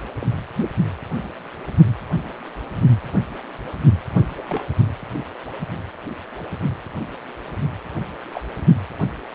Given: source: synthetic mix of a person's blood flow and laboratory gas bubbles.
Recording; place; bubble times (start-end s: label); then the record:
Doppler ultrasound of blood flow; precordium
0.21-0.27 s: bubbles
4.37-4.42 s: bubbles
4.46-4.65 s: bubbles
8.33-8.41 s: bubbles
From the record:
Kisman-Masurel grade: 121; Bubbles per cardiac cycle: 1 to 2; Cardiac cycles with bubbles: 10 to 50%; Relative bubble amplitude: barely perceptible (0.100 to 0.250); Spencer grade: 2 (many but less than half of the cardiac periods contain bubble signals, singularly or in groups); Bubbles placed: only in the low amplitude regions of the cardiac cycle